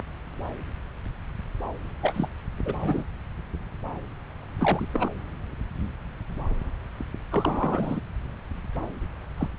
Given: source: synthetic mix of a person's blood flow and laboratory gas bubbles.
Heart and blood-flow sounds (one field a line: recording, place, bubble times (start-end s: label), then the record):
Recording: Doppler ultrasound of blood flow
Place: subclavian vein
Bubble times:
2.01-2.29 s: bubbles
2.58-2.62 s: bubbles
2.65-3.04 s: bubbles
4.60-4.87 s: bubbles
4.94-5.08 s: bubbles
7.31-8.00 s: bubbles
9.38-9.48 s: bubbles
From the record:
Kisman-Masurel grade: 221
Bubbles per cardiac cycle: several, 3 to 8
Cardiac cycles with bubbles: 10 to 50%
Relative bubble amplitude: barely perceptible (0.100 to 0.250)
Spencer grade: 2 (many but less than half of the cardiac periods contain bubble signals, singularly or in groups)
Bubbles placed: anywhere in the cardiac cycle